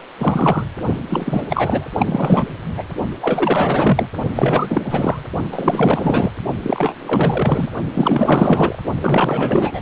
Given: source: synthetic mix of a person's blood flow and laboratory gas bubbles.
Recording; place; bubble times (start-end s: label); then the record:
Doppler ultrasound of blood flow; precordium
0.00-0.03 s: bubbles
0.16-0.66 s: bubbles
1.09-1.43 s: bubbles
1.49-1.88 s: bubbles
1.93-2.54 s: bubbles
2.77-2.83 s: bubbles
3.21-4.08 s: bubbles
4.35-5.22 s: bubbles
5.51-6.32 s: bubbles
6.62-7.68 s: bubbles
7.93-8.79 s: bubbles
9.01-9.81 s: bubbles
From the record:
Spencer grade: 4 (maximum detectable bubble signal sounding continuously throughout systole and diastole of every cardiac period, and overriding the amplitude of the normal cardiac signals); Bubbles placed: only in the low amplitude regions of the cardiac cycle